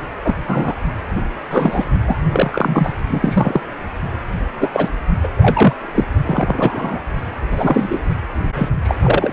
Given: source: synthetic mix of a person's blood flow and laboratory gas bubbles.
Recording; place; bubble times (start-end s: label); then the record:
Doppler ultrasound of blood flow; precordium
0.23-0.35 s: bubbles
0.47-0.74 s: bubbles
1.16-1.21 s: bubbles
1.50-1.85 s: bubbles
2.07-2.23 s: bubbles
2.32-2.94 s: bubbles
3.07-3.61 s: bubbles
4.60-4.90 s: bubbles
5.24-5.29 s: bubbles
5.37-5.74 s: bubbles
5.94-6.04 s: bubbles
6.25-7.00 s: bubbles
7.50-7.99 s: bubbles
8.55-8.70 s: bubbles
8.82-8.95 s: bubbles
9.02-9.33 s: bubbles
From the record:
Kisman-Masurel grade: 243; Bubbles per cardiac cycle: several, 3 to 8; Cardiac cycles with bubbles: 100%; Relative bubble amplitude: loud (0.450 to 0.775); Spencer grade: 3 (all of the cardiac periods contain showers or single bubble signals, but not dominating or overriding the cardiac motion signals); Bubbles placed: anywhere in the cardiac cycle